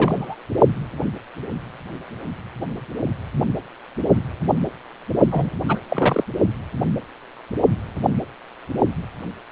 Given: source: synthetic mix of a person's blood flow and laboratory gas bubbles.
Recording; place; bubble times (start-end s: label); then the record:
Doppler ultrasound of blood flow; precordium
0.00-0.35 s: bubbles
5.31-5.50 s: bubbles
5.68-5.78 s: bubbles
5.89-6.24 s: bubbles
From the record:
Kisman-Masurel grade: 222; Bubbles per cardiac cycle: several, 3 to 8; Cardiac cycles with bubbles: 10 to 50%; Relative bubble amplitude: moderate (0.250 to 0.450); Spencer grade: 2 (many but less than half of the cardiac periods contain bubble signals, singularly or in groups); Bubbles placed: only in the low amplitude regions of the cardiac cycle